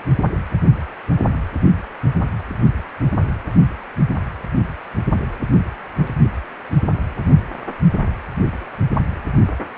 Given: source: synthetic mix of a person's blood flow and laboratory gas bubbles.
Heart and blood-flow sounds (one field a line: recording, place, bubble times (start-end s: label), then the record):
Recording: Doppler ultrasound of blood flow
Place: precordium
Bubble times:
no bubbles
From the record:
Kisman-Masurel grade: 000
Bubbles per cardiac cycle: 0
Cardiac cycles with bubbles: 0%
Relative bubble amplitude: no bubbles discernible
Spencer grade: 0 (complete lack of bubble signals)